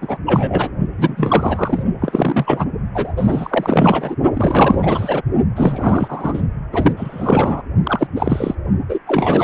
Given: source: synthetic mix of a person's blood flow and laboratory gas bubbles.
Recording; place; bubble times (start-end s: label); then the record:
Doppler ultrasound of blood flow; precordium
0.01-0.17 s: bubbles
0.26-0.70 s: bubbles
0.98-1.83 s: bubbles
2.01-2.67 s: bubbles
2.94-3.12 s: bubbles
3.17-4.15 s: bubbles
4.33-5.22 s: bubbles
5.56-6.42 s: bubbles
6.72-6.93 s: bubbles
6.96-7.62 s: bubbles
7.83-8.07 s: bubbles
8.15-8.55 s: bubbles
8.88-8.98 s: bubbles
9.07-9.44 s: bubbles
From the record:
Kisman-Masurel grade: 343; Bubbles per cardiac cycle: rolling drumbeat, 9 or more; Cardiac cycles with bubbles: 100%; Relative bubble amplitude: loud (0.450 to 0.775); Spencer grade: 3 (all of the cardiac periods contain showers or single bubble signals, but not dominating or overriding the cardiac motion signals); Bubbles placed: only in the low amplitude regions of the cardiac cycle